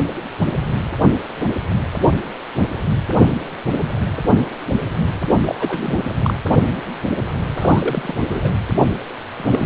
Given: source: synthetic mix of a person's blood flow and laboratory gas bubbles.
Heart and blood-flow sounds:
Doppler ultrasound of blood flow; precordium
5.30-5.39 s: bubbles
5.42-5.55 s: bubbles
5.59-6.15 s: bubbles
6.23-6.34 s: bubbles
7.57-8.14 s: bubbles
8.28-8.51 s: bubbles
9.34-9.66 s: bubbles
From the record:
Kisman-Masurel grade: 222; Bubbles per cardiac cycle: several, 3 to 8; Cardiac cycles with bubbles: 10 to 50%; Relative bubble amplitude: moderate (0.250 to 0.450); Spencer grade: 2 (many but less than half of the cardiac periods contain bubble signals, singularly or in groups); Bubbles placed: anywhere in the cardiac cycle

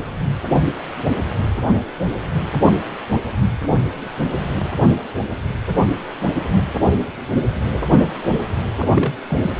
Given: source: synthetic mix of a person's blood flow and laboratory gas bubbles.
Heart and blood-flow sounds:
Doppler ultrasound of blood flow; precordium
8.82-8.88 s: bubbles
8.92-9.12 s: bubbles
9.30-9.38 s: bubbles
9.41-9.50 s: bubbles
From the record:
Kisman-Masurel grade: 212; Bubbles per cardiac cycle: several, 3 to 8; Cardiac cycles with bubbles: 1 to 10%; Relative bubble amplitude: moderate (0.250 to 0.450); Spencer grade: 1 (occasional bubble signal discernible with the cardiac motion signal, with majority of cardiac periods free of bubbles); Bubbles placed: anywhere in the cardiac cycle

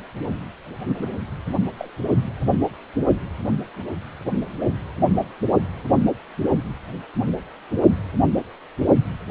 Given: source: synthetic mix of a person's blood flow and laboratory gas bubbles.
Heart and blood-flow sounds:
Doppler ultrasound of blood flow; precordium
0.98-1.19 s: bubbles
1.77-1.88 s: bubbles
From the record:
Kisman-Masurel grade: 111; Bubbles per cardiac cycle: 1 to 2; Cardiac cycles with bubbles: 1 to 10%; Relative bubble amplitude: barely perceptible (0.100 to 0.250); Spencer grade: 1 (occasional bubble signal discernible with the cardiac motion signal, with majority of cardiac periods free of bubbles); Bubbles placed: only in the low amplitude regions of the cardiac cycle

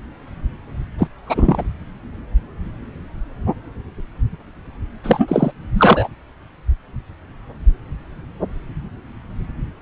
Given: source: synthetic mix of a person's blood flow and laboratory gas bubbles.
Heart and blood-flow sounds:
Doppler ultrasound of blood flow; subclavian vein
0.98-1.08 s: bubbles
1.25-1.65 s: bubbles
5.04-5.52 s: bubbles
5.74-6.08 s: bubbles
From the record:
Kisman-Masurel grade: 223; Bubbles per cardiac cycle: several, 3 to 8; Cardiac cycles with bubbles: 10 to 50%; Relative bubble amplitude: loud (0.450 to 0.775); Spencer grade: 2 (many but less than half of the cardiac periods contain bubble signals, singularly or in groups); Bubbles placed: anywhere in the cardiac cycle

